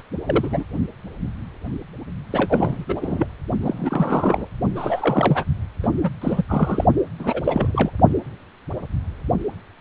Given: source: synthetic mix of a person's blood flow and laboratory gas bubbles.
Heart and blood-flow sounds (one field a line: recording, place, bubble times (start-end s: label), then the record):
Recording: Doppler ultrasound of blood flow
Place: precordium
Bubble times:
0.27-0.64 s: bubbles
2.31-2.85 s: bubbles
2.89-3.27 s: bubbles
3.62-4.47 s: bubbles
4.75-5.45 s: bubbles
5.83-5.88 s: bubbles
6.03-6.10 s: bubbles
6.21-6.43 s: bubbles
6.48-6.85 s: bubbles
7.19-7.40 s: bubbles
7.44-7.90 s: bubbles
From the record:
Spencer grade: 3 (all of the cardiac periods contain showers or single bubble signals, but not dominating or overriding the cardiac motion signals)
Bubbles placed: only in the low amplitude regions of the cardiac cycle